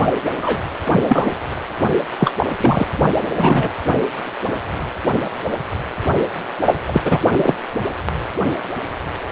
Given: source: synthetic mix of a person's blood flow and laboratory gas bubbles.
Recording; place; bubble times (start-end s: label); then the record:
Doppler ultrasound of blood flow; precordium
0.00-0.14 s: bubbles
0.37-0.60 s: bubbles
0.91-1.00 s: bubbles
1.08-1.32 s: bubbles
2.18-2.33 s: bubbles
2.38-2.47 s: bubbles
2.60-2.87 s: bubbles
3.35-3.72 s: bubbles
6.62-6.74 s: bubbles
6.88-7.01 s: bubbles
7.04-7.18 s: bubbles
7.37-7.54 s: bubbles
From the record:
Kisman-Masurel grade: 223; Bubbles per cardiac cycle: several, 3 to 8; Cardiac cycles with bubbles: 10 to 50%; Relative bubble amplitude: loud (0.450 to 0.775); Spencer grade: 2 (many but less than half of the cardiac periods contain bubble signals, singularly or in groups); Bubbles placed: anywhere in the cardiac cycle